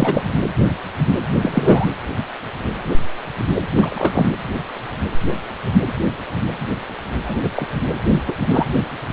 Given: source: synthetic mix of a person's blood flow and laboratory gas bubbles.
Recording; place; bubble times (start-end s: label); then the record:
Doppler ultrasound of blood flow; precordium
0.00-0.24 s: bubbles
1.42-1.87 s: bubbles
3.76-4.29 s: bubbles
7.24-7.66 s: bubbles
8.14-8.23 s: bubbles
8.25-8.35 s: bubbles
8.48-8.65 s: bubbles
From the record:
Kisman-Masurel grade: 233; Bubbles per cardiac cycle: several, 3 to 8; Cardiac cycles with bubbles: 50 to 99%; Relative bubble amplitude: loud (0.450 to 0.775); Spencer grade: 3 (all of the cardiac periods contain showers or single bubble signals, but not dominating or overriding the cardiac motion signals); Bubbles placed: anywhere in the cardiac cycle